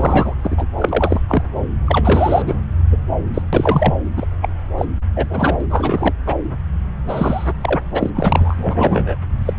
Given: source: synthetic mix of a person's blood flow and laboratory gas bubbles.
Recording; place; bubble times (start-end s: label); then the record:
Doppler ultrasound of blood flow; subclavian vein
0.00-0.35 s: bubbles
0.44-0.68 s: bubbles
0.78-1.21 s: bubbles
1.28-1.43 s: bubbles
1.86-2.42 s: bubbles
2.46-2.55 s: bubbles
2.92-2.96 s: bubbles
3.34-3.42 s: bubbles
3.53-3.95 s: bubbles
4.16-4.26 s: bubbles
4.41-4.49 s: bubbles
4.78-4.86 s: bubbles
5.16-5.66 s: bubbles
5.70-6.13 s: bubbles
6.26-6.35 s: bubbles
7.08-7.51 s: bubbles
7.61-7.80 s: bubbles
7.94-8.11 s: bubbles
8.14-9.15 s: bubbles
9.45-9.54 s: bubbles
From the record:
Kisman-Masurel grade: 333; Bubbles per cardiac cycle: rolling drumbeat, 9 or more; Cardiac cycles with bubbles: 50 to 99%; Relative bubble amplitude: loud (0.450 to 0.775); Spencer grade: 3 (all of the cardiac periods contain showers or single bubble signals, but not dominating or overriding the cardiac motion signals); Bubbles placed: anywhere in the cardiac cycle